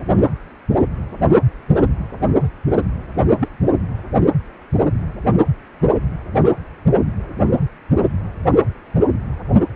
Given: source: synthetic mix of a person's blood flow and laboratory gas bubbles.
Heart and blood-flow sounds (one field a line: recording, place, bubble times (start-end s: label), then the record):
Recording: Doppler ultrasound of blood flow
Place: precordium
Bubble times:
3.40-3.48 s: bubbles
From the record:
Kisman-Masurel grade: 112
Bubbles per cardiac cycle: 1 to 2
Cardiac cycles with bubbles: 1 to 10%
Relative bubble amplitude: moderate (0.250 to 0.450)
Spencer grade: 1 (occasional bubble signal discernible with the cardiac motion signal, with majority of cardiac periods free of bubbles)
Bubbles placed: anywhere in the cardiac cycle